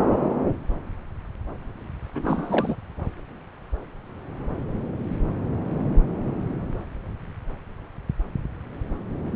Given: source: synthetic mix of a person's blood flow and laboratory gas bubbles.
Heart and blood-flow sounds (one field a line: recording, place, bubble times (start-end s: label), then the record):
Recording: Doppler ultrasound of blood flow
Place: subclavian vein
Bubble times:
2.15-2.75 s: bubbles
From the record:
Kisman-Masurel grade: 212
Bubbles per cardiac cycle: several, 3 to 8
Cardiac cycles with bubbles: 1 to 10%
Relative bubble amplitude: moderate (0.250 to 0.450)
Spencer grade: 1 (occasional bubble signal discernible with the cardiac motion signal, with majority of cardiac periods free of bubbles)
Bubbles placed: anywhere in the cardiac cycle